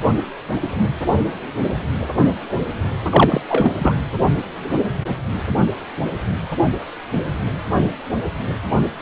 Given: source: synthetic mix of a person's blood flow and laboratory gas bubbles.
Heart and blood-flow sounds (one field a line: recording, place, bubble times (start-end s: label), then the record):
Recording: Doppler ultrasound of blood flow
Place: precordium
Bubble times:
3.10-3.41 s: bubbles
3.48-3.75 s: bubbles
3.79-3.95 s: bubbles
From the record:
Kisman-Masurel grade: 213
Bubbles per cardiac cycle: several, 3 to 8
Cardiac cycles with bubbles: 1 to 10%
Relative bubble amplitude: loud (0.450 to 0.775)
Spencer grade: 1 (occasional bubble signal discernible with the cardiac motion signal, with majority of cardiac periods free of bubbles)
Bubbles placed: anywhere in the cardiac cycle